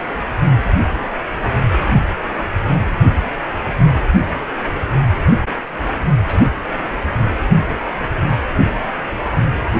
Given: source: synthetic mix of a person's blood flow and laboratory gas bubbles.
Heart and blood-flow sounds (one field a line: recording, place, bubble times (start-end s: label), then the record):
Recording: Doppler ultrasound of blood flow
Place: precordium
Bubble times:
6.27-6.45 s: bubbles
6.83-6.99 s: bubbles
From the record:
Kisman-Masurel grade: 121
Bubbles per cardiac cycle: 1 to 2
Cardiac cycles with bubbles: 10 to 50%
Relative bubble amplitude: barely perceptible (0.100 to 0.250)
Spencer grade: 2 (many but less than half of the cardiac periods contain bubble signals, singularly or in groups)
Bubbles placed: anywhere in the cardiac cycle